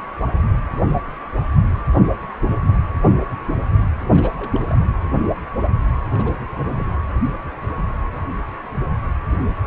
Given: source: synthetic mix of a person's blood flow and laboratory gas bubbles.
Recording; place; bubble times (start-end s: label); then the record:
Doppler ultrasound of blood flow; precordium
4.12-4.34 s: bubbles
4.37-4.59 s: bubbles
4.67-4.86 s: bubbles
6.12-6.38 s: bubbles
6.65-6.96 s: bubbles
From the record:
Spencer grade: 1 (occasional bubble signal discernible with the cardiac motion signal, with majority of cardiac periods free of bubbles); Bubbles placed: anywhere in the cardiac cycle